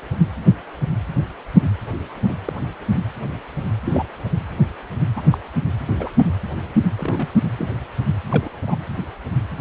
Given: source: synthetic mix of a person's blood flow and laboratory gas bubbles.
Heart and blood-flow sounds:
Doppler ultrasound of blood flow; precordium
2.28-2.33 s: bubbles
2.45-2.53 s: bubbles
3.85-4.05 s: bubbles
5.16-5.21 s: bubbles
5.30-5.38 s: bubbles
5.87-6.08 s: bubbles
6.98-7.28 s: bubbles
7.58-7.68 s: bubbles
8.30-8.48 s: bubbles
8.67-8.76 s: bubbles
From the record:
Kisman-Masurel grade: 122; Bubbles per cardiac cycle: 1 to 2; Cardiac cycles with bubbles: 10 to 50%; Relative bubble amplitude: moderate (0.250 to 0.450); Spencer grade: 2 (many but less than half of the cardiac periods contain bubble signals, singularly or in groups); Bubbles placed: anywhere in the cardiac cycle

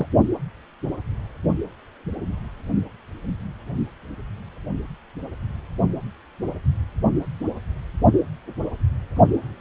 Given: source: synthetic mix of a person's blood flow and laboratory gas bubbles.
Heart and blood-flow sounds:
Doppler ultrasound of blood flow; precordium
0.00-0.07 s: bubbles
From the record:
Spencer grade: 1 (occasional bubble signal discernible with the cardiac motion signal, with majority of cardiac periods free of bubbles); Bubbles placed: only in the low amplitude regions of the cardiac cycle

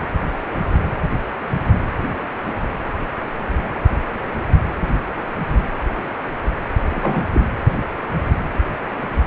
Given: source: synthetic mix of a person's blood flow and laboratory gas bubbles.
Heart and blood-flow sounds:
Doppler ultrasound of blood flow; precordium
6.90-7.26 s: bubbles
7.33-7.41 s: bubbles
From the record:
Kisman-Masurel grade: 113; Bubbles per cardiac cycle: 1 to 2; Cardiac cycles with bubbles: 1 to 10%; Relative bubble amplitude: loud (0.450 to 0.775); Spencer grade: 1 (occasional bubble signal discernible with the cardiac motion signal, with majority of cardiac periods free of bubbles); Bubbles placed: anywhere in the cardiac cycle

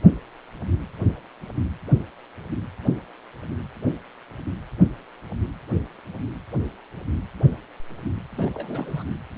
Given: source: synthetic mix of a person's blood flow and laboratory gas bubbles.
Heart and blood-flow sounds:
Doppler ultrasound of blood flow; precordium
8.38-8.50 s: bubbles
8.54-9.04 s: bubbles
From the record:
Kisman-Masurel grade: 221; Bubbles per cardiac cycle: several, 3 to 8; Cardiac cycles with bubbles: 10 to 50%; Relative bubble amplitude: barely perceptible (0.100 to 0.250); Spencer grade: 2 (many but less than half of the cardiac periods contain bubble signals, singularly or in groups); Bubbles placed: anywhere in the cardiac cycle

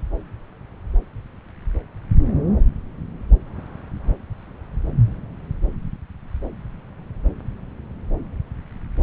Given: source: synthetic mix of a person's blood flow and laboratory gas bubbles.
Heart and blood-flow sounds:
Doppler ultrasound of blood flow; subclavian vein
no bubbles
From the record:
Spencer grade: 0 (complete lack of bubble signals)

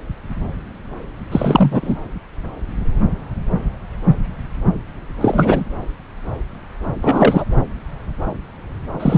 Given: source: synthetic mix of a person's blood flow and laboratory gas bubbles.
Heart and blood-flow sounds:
Doppler ultrasound of blood flow; subclavian vein
1.31-1.96 s: bubbles
5.21-5.64 s: bubbles
7.02-7.45 s: bubbles
9.00-9.18 s: bubbles
From the record:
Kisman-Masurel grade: 223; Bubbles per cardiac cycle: several, 3 to 8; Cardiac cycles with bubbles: 10 to 50%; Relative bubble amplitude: loud (0.450 to 0.775); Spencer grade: 2 (many but less than half of the cardiac periods contain bubble signals, singularly or in groups); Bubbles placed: anywhere in the cardiac cycle

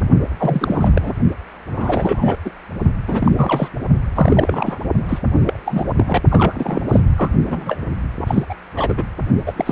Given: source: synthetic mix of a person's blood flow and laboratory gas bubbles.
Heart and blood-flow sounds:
Doppler ultrasound of blood flow; precordium
0.38-1.12 s: bubbles
1.71-2.38 s: bubbles
2.44-2.50 s: bubbles
3.07-3.69 s: bubbles
4.12-4.79 s: bubbles
5.08-5.19 s: bubbles
5.39-5.59 s: bubbles
5.66-5.87 s: bubbles
5.97-6.21 s: bubbles
6.31-6.82 s: bubbles
6.89-7.00 s: bubbles
7.17-7.29 s: bubbles
7.45-7.78 s: bubbles
8.21-8.44 s: bubbles
8.50-8.54 s: bubbles
8.75-9.04 s: bubbles
9.46-9.53 s: bubbles
9.56-9.72 s: bubbles
From the record:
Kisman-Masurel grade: 342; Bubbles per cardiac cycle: rolling drumbeat, 9 or more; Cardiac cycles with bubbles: 100%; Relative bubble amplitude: moderate (0.250 to 0.450); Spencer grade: 3 (all of the cardiac periods contain showers or single bubble signals, but not dominating or overriding the cardiac motion signals); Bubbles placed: only in the low amplitude regions of the cardiac cycle

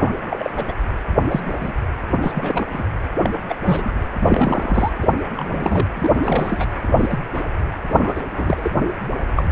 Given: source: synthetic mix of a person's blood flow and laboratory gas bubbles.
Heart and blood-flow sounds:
Doppler ultrasound of blood flow; precordium
0.00-0.14 s: bubbles
0.30-0.50 s: bubbles
0.55-0.73 s: bubbles
1.30-1.41 s: bubbles
1.45-1.72 s: bubbles
2.21-2.65 s: bubbles
2.73-2.83 s: bubbles
3.22-3.31 s: bubbles
3.48-3.55 s: bubbles
3.65-3.92 s: bubbles
4.21-4.91 s: bubbles
5.02-5.12 s: bubbles
5.35-5.87 s: bubbles
5.94-6.11 s: bubbles
6.23-6.67 s: bubbles
6.88-6.92 s: bubbles
6.96-7.19 s: bubbles
7.33-7.44 s: bubbles
7.89-8.21 s: bubbles
8.31-8.71 s: bubbles
9.35-9.48 s: bubbles
From the record:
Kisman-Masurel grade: 242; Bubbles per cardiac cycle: several, 3 to 8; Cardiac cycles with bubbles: 100%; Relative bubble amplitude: moderate (0.250 to 0.450); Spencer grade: 3 (all of the cardiac periods contain showers or single bubble signals, but not dominating or overriding the cardiac motion signals); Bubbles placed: anywhere in the cardiac cycle

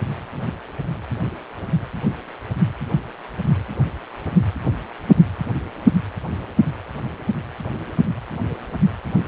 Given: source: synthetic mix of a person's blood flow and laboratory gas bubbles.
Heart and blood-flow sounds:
Doppler ultrasound of blood flow; precordium
no bubbles
From the record:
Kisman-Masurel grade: 000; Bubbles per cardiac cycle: 0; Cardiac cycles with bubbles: 0%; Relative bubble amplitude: no bubbles discernible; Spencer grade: 0 (complete lack of bubble signals)

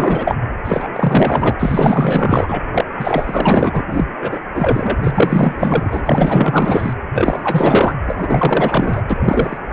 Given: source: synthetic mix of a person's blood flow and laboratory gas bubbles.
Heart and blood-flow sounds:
Doppler ultrasound of blood flow; precordium
0.00-0.35 s: bubbles
0.64-0.88 s: bubbles
0.93-1.55 s: bubbles
1.59-2.60 s: bubbles
2.73-2.85 s: bubbles
2.99-3.83 s: bubbles
3.91-4.13 s: bubbles
4.21-4.38 s: bubbles
4.54-4.96 s: bubbles
5.00-6.02 s: bubbles
6.05-6.94 s: bubbles
7.13-7.96 s: bubbles
8.05-9.01 s: bubbles
9.09-9.17 s: bubbles
9.20-9.58 s: bubbles
9.70-9.73 s: bubbles
From the record:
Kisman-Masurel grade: 444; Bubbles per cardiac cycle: continuous sound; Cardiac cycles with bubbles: 100%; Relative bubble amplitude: maximal (0.775 to 0.999); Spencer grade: 4 (maximum detectable bubble signal sounding continuously throughout systole and diastole of every cardiac period, and overriding the amplitude of the normal cardiac signals); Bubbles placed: anywhere in the cardiac cycle

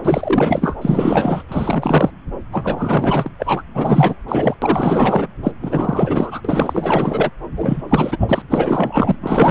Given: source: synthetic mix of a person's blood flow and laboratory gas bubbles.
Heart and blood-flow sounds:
Doppler ultrasound of blood flow; subclavian vein
0.04-0.77 s: bubbles
0.81-1.43 s: bubbles
1.48-2.10 s: bubbles
2.51-3.30 s: bubbles
3.38-3.62 s: bubbles
3.74-4.15 s: bubbles
4.28-4.54 s: bubbles
4.62-5.27 s: bubbles
5.43-5.52 s: bubbles
5.62-6.41 s: bubbles
6.45-7.31 s: bubbles
7.57-7.82 s: bubbles
7.89-8.42 s: bubbles
8.49-9.15 s: bubbles
9.21-9.51 s: bubbles
From the record:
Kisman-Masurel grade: 444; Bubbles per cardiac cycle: continuous sound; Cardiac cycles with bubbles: 100%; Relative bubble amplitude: maximal (0.775 to 0.999); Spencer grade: 4 (maximum detectable bubble signal sounding continuously throughout systole and diastole of every cardiac period, and overriding the amplitude of the normal cardiac signals); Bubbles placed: anywhere in the cardiac cycle

